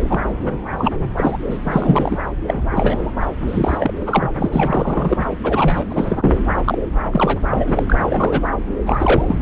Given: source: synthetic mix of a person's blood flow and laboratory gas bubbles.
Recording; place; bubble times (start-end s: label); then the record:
Doppler ultrasound of blood flow; subclavian vein
0.09-0.20 s: bubbles
0.40-0.57 s: bubbles
0.77-0.95 s: bubbles
1.18-1.36 s: bubbles
1.45-1.58 s: bubbles
1.63-2.18 s: bubbles
2.40-2.65 s: bubbles
2.71-3.11 s: bubbles
3.21-3.26 s: bubbles
3.48-3.94 s: bubbles
4.01-4.32 s: bubbles
4.38-5.26 s: bubbles
5.43-6.37 s: bubbles
6.65-6.78 s: bubbles
7.12-7.83 s: bubbles
7.88-7.96 s: bubbles
8.09-8.40 s: bubbles
8.86-9.38 s: bubbles
From the record:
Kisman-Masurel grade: 343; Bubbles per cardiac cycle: rolling drumbeat, 9 or more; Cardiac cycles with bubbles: 100%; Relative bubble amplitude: loud (0.450 to 0.775); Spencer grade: 3 (all of the cardiac periods contain showers or single bubble signals, but not dominating or overriding the cardiac motion signals); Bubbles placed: anywhere in the cardiac cycle